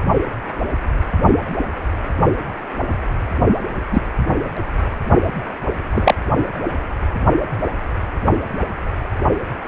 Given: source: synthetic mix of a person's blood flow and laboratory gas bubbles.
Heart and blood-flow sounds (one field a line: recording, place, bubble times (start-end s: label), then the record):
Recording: Doppler ultrasound of blood flow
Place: precordium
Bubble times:
3.92-4.01 s: bubbles
5.90-6.15 s: bubbles
From the record:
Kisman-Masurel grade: 123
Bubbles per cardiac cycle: 1 to 2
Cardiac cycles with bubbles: 10 to 50%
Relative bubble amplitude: loud (0.450 to 0.775)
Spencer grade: 2 (many but less than half of the cardiac periods contain bubble signals, singularly or in groups)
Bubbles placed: only in the low amplitude regions of the cardiac cycle